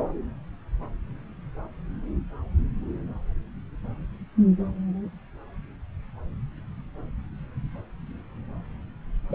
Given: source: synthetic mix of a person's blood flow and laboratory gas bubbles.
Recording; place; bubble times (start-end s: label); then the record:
Doppler ultrasound of blood flow; subclavian vein
9.30-9.35 s: bubbles
From the record:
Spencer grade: 1 (occasional bubble signal discernible with the cardiac motion signal, with majority of cardiac periods free of bubbles); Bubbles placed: anywhere in the cardiac cycle